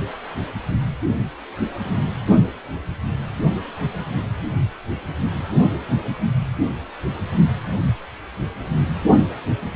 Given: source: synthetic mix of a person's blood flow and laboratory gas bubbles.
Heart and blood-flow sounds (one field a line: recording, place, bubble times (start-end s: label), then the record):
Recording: Doppler ultrasound of blood flow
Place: precordium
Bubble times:
no bubbles
From the record:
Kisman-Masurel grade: 000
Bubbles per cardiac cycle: 0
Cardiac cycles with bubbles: 0%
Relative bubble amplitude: no bubbles discernible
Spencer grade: 0 (complete lack of bubble signals)